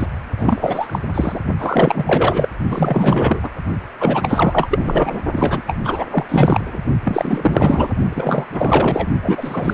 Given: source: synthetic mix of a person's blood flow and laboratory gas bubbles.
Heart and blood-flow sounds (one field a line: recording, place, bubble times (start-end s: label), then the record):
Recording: Doppler ultrasound of blood flow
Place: precordium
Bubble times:
0.00-0.07 s: bubbles
0.39-0.99 s: bubbles
1.14-1.40 s: bubbles
1.58-2.48 s: bubbles
2.69-3.40 s: bubbles
3.42-3.49 s: bubbles
4.00-5.20 s: bubbles
5.32-5.62 s: bubbles
5.67-5.77 s: bubbles
5.84-6.06 s: bubbles
6.11-6.25 s: bubbles
6.29-6.79 s: bubbles
7.04-7.93 s: bubbles
8.10-8.46 s: bubbles
8.51-9.07 s: bubbles
9.22-9.74 s: bubbles
From the record:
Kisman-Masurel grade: 444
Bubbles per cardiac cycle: continuous sound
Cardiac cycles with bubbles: 100%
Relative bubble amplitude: maximal (0.775 to 0.999)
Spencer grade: 4 (maximum detectable bubble signal sounding continuously throughout systole and diastole of every cardiac period, and overriding the amplitude of the normal cardiac signals)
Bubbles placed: only in the low amplitude regions of the cardiac cycle